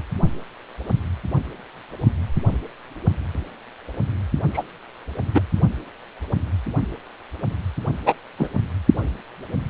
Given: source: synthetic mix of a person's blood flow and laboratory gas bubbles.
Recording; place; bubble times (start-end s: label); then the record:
Doppler ultrasound of blood flow; precordium
4.53-4.63 s: bubbles
5.34-5.41 s: bubbles
8.06-8.15 s: bubbles
8.39-8.48 s: bubbles
From the record:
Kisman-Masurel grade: 123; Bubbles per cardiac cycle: 1 to 2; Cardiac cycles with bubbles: 10 to 50%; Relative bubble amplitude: loud (0.450 to 0.775); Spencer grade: 2 (many but less than half of the cardiac periods contain bubble signals, singularly or in groups); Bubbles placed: only in the low amplitude regions of the cardiac cycle